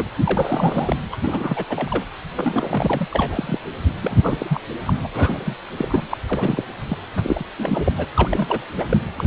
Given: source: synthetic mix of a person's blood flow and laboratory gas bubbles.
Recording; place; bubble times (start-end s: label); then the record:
Doppler ultrasound of blood flow; precordium
0.00-0.09 s: bubbles
0.15-0.96 s: bubbles
1.11-1.16 s: bubbles
1.23-1.65 s: bubbles
1.69-2.04 s: bubbles
2.35-3.07 s: bubbles
3.10-3.58 s: bubbles
4.02-4.60 s: bubbles
4.87-4.94 s: bubbles
5.04-5.07 s: bubbles
5.13-5.55 s: bubbles
5.77-6.03 s: bubbles
6.10-6.18 s: bubbles
6.28-6.64 s: bubbles
6.89-6.96 s: bubbles
7.15-7.44 s: bubbles
7.57-7.93 s: bubbles
7.97-8.05 s: bubbles
8.16-8.63 s: bubbles
8.78-8.85 s: bubbles
8.89-8.97 s: bubbles
9.16-9.27 s: bubbles
From the record:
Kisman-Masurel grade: 332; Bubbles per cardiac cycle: rolling drumbeat, 9 or more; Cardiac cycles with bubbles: 50 to 99%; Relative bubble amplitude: moderate (0.250 to 0.450); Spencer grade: 3 (all of the cardiac periods contain showers or single bubble signals, but not dominating or overriding the cardiac motion signals); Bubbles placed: anywhere in the cardiac cycle